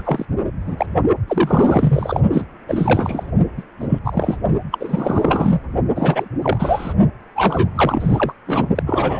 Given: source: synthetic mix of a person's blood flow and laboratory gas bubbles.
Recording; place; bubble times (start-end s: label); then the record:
Doppler ultrasound of blood flow; precordium
0.00-0.26 s: bubbles
0.67-0.86 s: bubbles
1.27-2.21 s: bubbles
2.32-2.47 s: bubbles
2.67-3.31 s: bubbles
3.57-3.63 s: bubbles
3.80-3.99 s: bubbles
4.04-4.37 s: bubbles
4.71-5.60 s: bubbles
5.95-6.28 s: bubbles
6.42-6.94 s: bubbles
7.36-7.70 s: bubbles
7.75-8.32 s: bubbles
8.47-8.66 s: bubbles
8.75-8.83 s: bubbles
8.86-9.20 s: bubbles
From the record:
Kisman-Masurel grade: 343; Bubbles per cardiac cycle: rolling drumbeat, 9 or more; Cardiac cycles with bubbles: 100%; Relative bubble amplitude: loud (0.450 to 0.775); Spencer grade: 3 (all of the cardiac periods contain showers or single bubble signals, but not dominating or overriding the cardiac motion signals); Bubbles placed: only in the low amplitude regions of the cardiac cycle